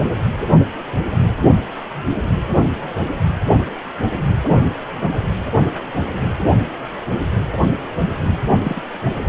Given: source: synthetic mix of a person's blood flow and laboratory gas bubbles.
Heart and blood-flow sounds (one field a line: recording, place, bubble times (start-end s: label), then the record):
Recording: Doppler ultrasound of blood flow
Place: precordium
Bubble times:
8.63-8.81 s: bubbles
9.22-9.29 s: bubbles
From the record:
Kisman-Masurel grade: 212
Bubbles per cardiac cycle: several, 3 to 8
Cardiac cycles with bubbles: 1 to 10%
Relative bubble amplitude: moderate (0.250 to 0.450)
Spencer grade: 1 (occasional bubble signal discernible with the cardiac motion signal, with majority of cardiac periods free of bubbles)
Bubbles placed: anywhere in the cardiac cycle